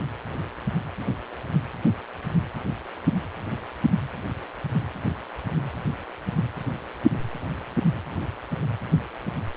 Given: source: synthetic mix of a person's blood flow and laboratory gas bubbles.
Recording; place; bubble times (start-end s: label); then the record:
Doppler ultrasound of blood flow; precordium
no bubbles
From the record:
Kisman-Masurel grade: 000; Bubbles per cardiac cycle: 0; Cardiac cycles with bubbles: 0%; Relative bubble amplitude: no bubbles discernible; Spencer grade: 0 (complete lack of bubble signals)